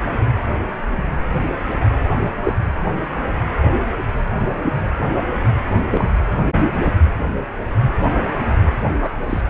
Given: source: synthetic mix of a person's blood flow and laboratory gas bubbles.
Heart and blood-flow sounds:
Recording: Doppler ultrasound of blood flow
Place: precordium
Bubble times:
2.43-2.53 s: bubbles
5.91-6.08 s: bubbles
8.86-9.14 s: bubbles
9.29-9.42 s: bubbles
From the record:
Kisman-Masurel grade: 122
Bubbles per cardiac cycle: 1 to 2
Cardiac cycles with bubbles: 10 to 50%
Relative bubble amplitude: moderate (0.250 to 0.450)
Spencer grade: 2 (many but less than half of the cardiac periods contain bubble signals, singularly or in groups)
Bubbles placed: anywhere in the cardiac cycle

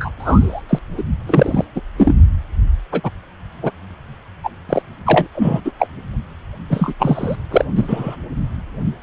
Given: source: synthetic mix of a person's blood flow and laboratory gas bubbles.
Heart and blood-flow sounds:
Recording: Doppler ultrasound of blood flow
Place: precordium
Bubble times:
0.00-0.10 s: bubbles
0.20-0.62 s: bubbles
0.69-0.79 s: bubbles
0.98-1.03 s: bubbles
1.26-1.64 s: bubbles
1.75-1.82 s: bubbles
1.97-2.14 s: bubbles
2.92-3.10 s: bubbles
3.62-3.71 s: bubbles
4.43-4.50 s: bubbles
4.69-4.82 s: bubbles
5.05-5.27 s: bubbles
5.34-5.61 s: bubbles
5.64-5.72 s: bubbles
5.79-5.87 s: bubbles
6.69-6.93 s: bubbles
6.98-7.35 s: bubbles
7.50-7.65 s: bubbles
7.75-8.16 s: bubbles
From the record:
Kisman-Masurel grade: 243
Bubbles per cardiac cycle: several, 3 to 8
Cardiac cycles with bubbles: 100%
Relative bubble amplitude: loud (0.450 to 0.775)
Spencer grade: 3 (all of the cardiac periods contain showers or single bubble signals, but not dominating or overriding the cardiac motion signals)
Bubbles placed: anywhere in the cardiac cycle

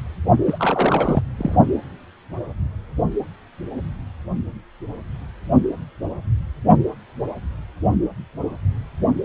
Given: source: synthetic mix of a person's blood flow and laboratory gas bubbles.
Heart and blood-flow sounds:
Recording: Doppler ultrasound of blood flow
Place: precordium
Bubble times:
0.45-1.23 s: bubbles
1.38-1.55 s: bubbles
From the record:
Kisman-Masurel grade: 212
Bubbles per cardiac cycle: several, 3 to 8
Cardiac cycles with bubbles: 1 to 10%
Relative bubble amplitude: moderate (0.250 to 0.450)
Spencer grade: 1 (occasional bubble signal discernible with the cardiac motion signal, with majority of cardiac periods free of bubbles)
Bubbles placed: only in the low amplitude regions of the cardiac cycle

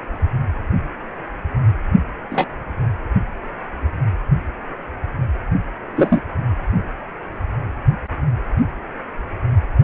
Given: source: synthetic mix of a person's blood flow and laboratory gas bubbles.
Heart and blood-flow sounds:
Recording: Doppler ultrasound of blood flow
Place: precordium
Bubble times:
2.30-2.46 s: bubbles
5.96-6.22 s: bubbles
From the record:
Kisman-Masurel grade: 123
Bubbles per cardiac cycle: 1 to 2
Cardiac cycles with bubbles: 10 to 50%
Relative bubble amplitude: loud (0.450 to 0.775)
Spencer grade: 2 (many but less than half of the cardiac periods contain bubble signals, singularly or in groups)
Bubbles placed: anywhere in the cardiac cycle

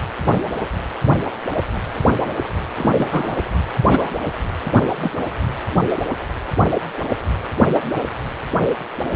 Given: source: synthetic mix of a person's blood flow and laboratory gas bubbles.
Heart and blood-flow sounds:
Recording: Doppler ultrasound of blood flow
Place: precordium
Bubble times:
2.77-3.37 s: bubbles
3.88-4.10 s: bubbles
5.00-5.13 s: bubbles
From the record:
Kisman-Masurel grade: 122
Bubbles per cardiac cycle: 1 to 2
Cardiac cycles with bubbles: 10 to 50%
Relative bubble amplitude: moderate (0.250 to 0.450)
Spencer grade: 2 (many but less than half of the cardiac periods contain bubble signals, singularly or in groups)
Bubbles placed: anywhere in the cardiac cycle

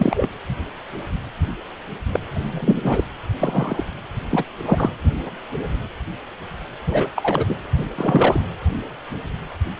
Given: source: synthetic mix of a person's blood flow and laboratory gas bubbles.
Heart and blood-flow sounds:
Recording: Doppler ultrasound of blood flow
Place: precordium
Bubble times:
0.00-0.27 s: bubbles
2.12-2.20 s: bubbles
2.44-3.04 s: bubbles
3.39-3.85 s: bubbles
4.29-4.44 s: bubbles
4.65-4.90 s: bubbles
6.86-7.09 s: bubbles
7.15-7.46 s: bubbles
7.48-7.55 s: bubbles
7.77-7.84 s: bubbles
7.95-8.42 s: bubbles
From the record:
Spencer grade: 3 (all of the cardiac periods contain showers or single bubble signals, but not dominating or overriding the cardiac motion signals)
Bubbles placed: anywhere in the cardiac cycle

